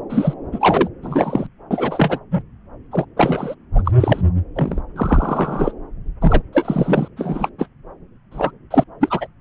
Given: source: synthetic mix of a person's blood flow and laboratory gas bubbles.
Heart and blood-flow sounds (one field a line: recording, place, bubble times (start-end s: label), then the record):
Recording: Doppler ultrasound of blood flow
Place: subclavian vein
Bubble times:
0.10-0.34 s: bubbles
0.52-0.89 s: bubbles
1.02-1.47 s: bubbles
1.71-2.19 s: bubbles
2.31-2.43 s: bubbles
2.91-3.05 s: bubbles
3.17-3.54 s: bubbles
3.75-3.91 s: bubbles
4.00-4.22 s: bubbles
4.55-4.81 s: bubbles
4.96-5.72 s: bubbles
6.21-6.44 s: bubbles
6.52-7.08 s: bubbles
7.16-7.49 s: bubbles
7.58-7.67 s: bubbles
8.31-8.51 s: bubbles
8.71-8.84 s: bubbles
9.00-9.26 s: bubbles
From the record:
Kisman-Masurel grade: 343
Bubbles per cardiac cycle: rolling drumbeat, 9 or more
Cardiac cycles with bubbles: 100%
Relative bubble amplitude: loud (0.450 to 0.775)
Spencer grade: 3 (all of the cardiac periods contain showers or single bubble signals, but not dominating or overriding the cardiac motion signals)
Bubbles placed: anywhere in the cardiac cycle